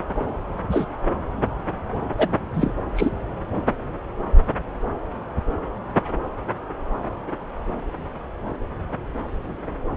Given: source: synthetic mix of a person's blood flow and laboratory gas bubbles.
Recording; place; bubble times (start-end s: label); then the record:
Doppler ultrasound of blood flow; subclavian vein
0.70-0.86 s: bubbles
2.18-2.28 s: bubbles
2.54-2.72 s: bubbles
2.96-3.10 s: bubbles
From the record:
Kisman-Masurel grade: 123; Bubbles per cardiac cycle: 1 to 2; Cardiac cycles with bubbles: 10 to 50%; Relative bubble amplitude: loud (0.450 to 0.775); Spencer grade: 2 (many but less than half of the cardiac periods contain bubble signals, singularly or in groups); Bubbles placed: anywhere in the cardiac cycle